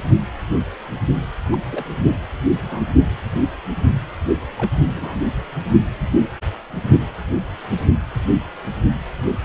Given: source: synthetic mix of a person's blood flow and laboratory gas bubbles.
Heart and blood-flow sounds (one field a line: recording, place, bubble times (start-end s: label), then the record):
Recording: Doppler ultrasound of blood flow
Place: precordium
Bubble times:
1.52-1.58 s: bubbles
1.71-1.94 s: bubbles
2.64-2.84 s: bubbles
4.56-4.77 s: bubbles
4.96-5.29 s: bubbles
From the record:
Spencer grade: 2 (many but less than half of the cardiac periods contain bubble signals, singularly or in groups)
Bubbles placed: only in the low amplitude regions of the cardiac cycle